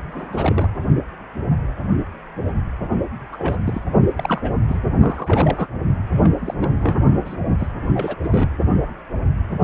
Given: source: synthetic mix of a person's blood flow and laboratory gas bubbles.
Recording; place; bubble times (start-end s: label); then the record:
Doppler ultrasound of blood flow; precordium
0.11-0.69 s: bubbles
3.32-3.56 s: bubbles
3.66-3.81 s: bubbles
4.17-4.52 s: bubbles
4.68-4.80 s: bubbles
5.00-5.68 s: bubbles
6.22-6.32 s: bubbles
6.39-6.54 s: bubbles
6.61-6.69 s: bubbles
6.81-6.96 s: bubbles
7.24-7.35 s: bubbles
7.59-7.67 s: bubbles
7.93-8.16 s: bubbles
8.23-8.50 s: bubbles
From the record:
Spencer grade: 3 (all of the cardiac periods contain showers or single bubble signals, but not dominating or overriding the cardiac motion signals); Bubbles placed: only in the low amplitude regions of the cardiac cycle